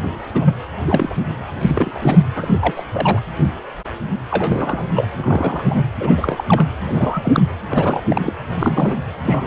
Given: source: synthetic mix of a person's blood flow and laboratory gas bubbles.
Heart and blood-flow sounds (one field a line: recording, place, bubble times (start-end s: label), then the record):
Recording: Doppler ultrasound of blood flow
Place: precordium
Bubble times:
0.03-0.12 s: bubbles
0.34-0.55 s: bubbles
0.86-1.15 s: bubbles
1.61-2.23 s: bubbles
2.35-2.83 s: bubbles
2.92-3.20 s: bubbles
4.31-4.89 s: bubbles
4.95-5.07 s: bubbles
5.17-5.86 s: bubbles
6.00-6.44 s: bubbles
6.48-6.67 s: bubbles
6.86-7.43 s: bubbles
7.68-8.03 s: bubbles
8.08-8.33 s: bubbles
8.59-8.95 s: bubbles
9.24-9.47 s: bubbles
From the record:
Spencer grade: 3 (all of the cardiac periods contain showers or single bubble signals, but not dominating or overriding the cardiac motion signals)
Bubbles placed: anywhere in the cardiac cycle